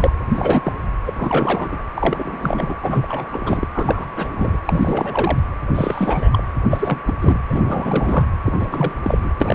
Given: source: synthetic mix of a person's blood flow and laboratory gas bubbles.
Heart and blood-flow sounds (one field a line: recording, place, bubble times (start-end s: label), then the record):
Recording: Doppler ultrasound of blood flow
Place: precordium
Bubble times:
0.00-0.12 s: bubbles
0.29-0.72 s: bubbles
1.06-1.82 s: bubbles
1.94-2.77 s: bubbles
2.82-3.68 s: bubbles
3.73-4.08 s: bubbles
4.16-4.58 s: bubbles
4.67-5.40 s: bubbles
5.75-6.43 s: bubbles
6.70-6.99 s: bubbles
7.07-7.13 s: bubbles
7.21-7.41 s: bubbles
7.48-8.27 s: bubbles
8.46-8.53 s: bubbles
8.59-8.95 s: bubbles
9.04-9.33 s: bubbles
9.40-9.55 s: bubbles
From the record:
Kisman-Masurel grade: 342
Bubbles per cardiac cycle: rolling drumbeat, 9 or more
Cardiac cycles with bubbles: 100%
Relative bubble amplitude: moderate (0.250 to 0.450)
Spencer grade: 3 (all of the cardiac periods contain showers or single bubble signals, but not dominating or overriding the cardiac motion signals)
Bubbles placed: anywhere in the cardiac cycle